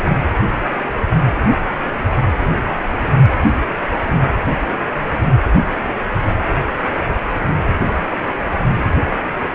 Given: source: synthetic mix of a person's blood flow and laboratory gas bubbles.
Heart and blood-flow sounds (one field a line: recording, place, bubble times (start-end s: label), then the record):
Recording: Doppler ultrasound of blood flow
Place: precordium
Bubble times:
0.00-0.09 s: bubbles
From the record:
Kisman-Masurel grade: 211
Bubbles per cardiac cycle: several, 3 to 8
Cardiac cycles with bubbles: 1 to 10%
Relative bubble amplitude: barely perceptible (0.100 to 0.250)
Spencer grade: 1 (occasional bubble signal discernible with the cardiac motion signal, with majority of cardiac periods free of bubbles)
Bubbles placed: anywhere in the cardiac cycle